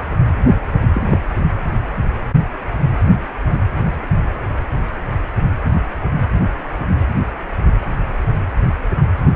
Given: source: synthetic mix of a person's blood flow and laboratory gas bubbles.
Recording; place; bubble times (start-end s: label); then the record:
Doppler ultrasound of blood flow; precordium
0.93-1.19 s: bubbles
From the record:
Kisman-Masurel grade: 112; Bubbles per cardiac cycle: 1 to 2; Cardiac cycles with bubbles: 1 to 10%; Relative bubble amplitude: moderate (0.250 to 0.450); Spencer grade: 1 (occasional bubble signal discernible with the cardiac motion signal, with majority of cardiac periods free of bubbles); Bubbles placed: anywhere in the cardiac cycle